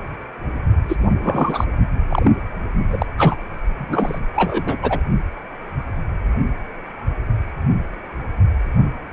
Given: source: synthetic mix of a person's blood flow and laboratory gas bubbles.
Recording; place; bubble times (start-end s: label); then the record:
Doppler ultrasound of blood flow; precordium
0.89-0.97 s: bubbles
1.21-1.65 s: bubbles
2.10-2.29 s: bubbles
2.92-3.06 s: bubbles
3.17-3.35 s: bubbles
3.78-4.19 s: bubbles
4.35-4.76 s: bubbles
4.82-4.99 s: bubbles
From the record:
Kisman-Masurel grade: 223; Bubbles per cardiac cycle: several, 3 to 8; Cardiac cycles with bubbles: 10 to 50%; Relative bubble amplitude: loud (0.450 to 0.775); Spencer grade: 2 (many but less than half of the cardiac periods contain bubble signals, singularly or in groups); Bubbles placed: only in the low amplitude regions of the cardiac cycle